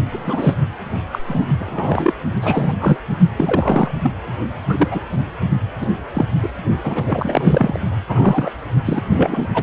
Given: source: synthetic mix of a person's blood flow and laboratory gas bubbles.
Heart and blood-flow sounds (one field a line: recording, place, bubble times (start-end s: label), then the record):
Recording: Doppler ultrasound of blood flow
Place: precordium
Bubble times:
0.10-0.55 s: bubbles
1.11-1.19 s: bubbles
1.27-1.44 s: bubbles
1.58-2.12 s: bubbles
2.42-2.77 s: bubbles
2.80-2.97 s: bubbles
3.36-3.91 s: bubbles
4.03-4.12 s: bubbles
4.68-4.88 s: bubbles
4.91-5.00 s: bubbles
5.80-5.87 s: bubbles
6.14-6.26 s: bubbles
6.42-6.49 s: bubbles
6.83-7.79 s: bubbles
8.08-8.51 s: bubbles
8.86-9.02 s: bubbles
9.10-9.48 s: bubbles
9.54-9.63 s: bubbles
From the record:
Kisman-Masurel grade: 243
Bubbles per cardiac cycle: several, 3 to 8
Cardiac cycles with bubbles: 100%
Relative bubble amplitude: loud (0.450 to 0.775)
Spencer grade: 3 (all of the cardiac periods contain showers or single bubble signals, but not dominating or overriding the cardiac motion signals)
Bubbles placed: only in the low amplitude regions of the cardiac cycle